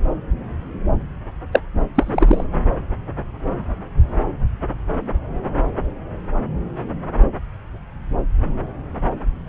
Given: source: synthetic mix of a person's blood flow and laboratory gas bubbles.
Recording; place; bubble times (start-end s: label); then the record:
Doppler ultrasound of blood flow; subclavian vein
1.52-1.60 s: bubbles
1.95-2.44 s: bubbles
From the record:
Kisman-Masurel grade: 123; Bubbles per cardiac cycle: 1 to 2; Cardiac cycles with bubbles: 10 to 50%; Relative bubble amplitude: loud (0.450 to 0.775); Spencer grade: 2 (many but less than half of the cardiac periods contain bubble signals, singularly or in groups); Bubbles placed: anywhere in the cardiac cycle